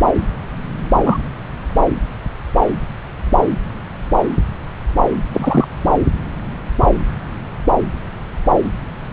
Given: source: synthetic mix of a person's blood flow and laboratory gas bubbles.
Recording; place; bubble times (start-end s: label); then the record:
Doppler ultrasound of blood flow; subclavian vein
1.03-1.17 s: bubbles
5.33-5.67 s: bubbles
From the record:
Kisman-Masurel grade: 123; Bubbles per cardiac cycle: 1 to 2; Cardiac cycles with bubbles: 10 to 50%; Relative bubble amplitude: loud (0.450 to 0.775); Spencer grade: 2 (many but less than half of the cardiac periods contain bubble signals, singularly or in groups); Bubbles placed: anywhere in the cardiac cycle